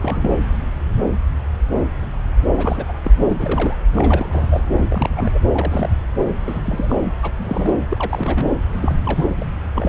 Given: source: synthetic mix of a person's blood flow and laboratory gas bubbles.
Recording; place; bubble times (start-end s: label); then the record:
Doppler ultrasound of blood flow; subclavian vein
0.00-0.38 s: bubbles
2.54-2.94 s: bubbles
3.03-3.11 s: bubbles
3.19-3.76 s: bubbles
3.92-4.62 s: bubbles
4.75-5.39 s: bubbles
5.53-5.90 s: bubbles
6.41-6.60 s: bubbles
6.64-6.96 s: bubbles
7.23-7.31 s: bubbles
7.38-7.74 s: bubbles
7.89-8.47 s: bubbles
8.82-8.95 s: bubbles
9.05-9.26 s: bubbles
9.37-9.45 s: bubbles
9.75-9.89 s: bubbles
From the record:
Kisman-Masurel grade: 232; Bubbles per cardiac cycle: several, 3 to 8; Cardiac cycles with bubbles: 50 to 99%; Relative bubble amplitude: moderate (0.250 to 0.450); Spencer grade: 3 (all of the cardiac periods contain showers or single bubble signals, but not dominating or overriding the cardiac motion signals); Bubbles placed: anywhere in the cardiac cycle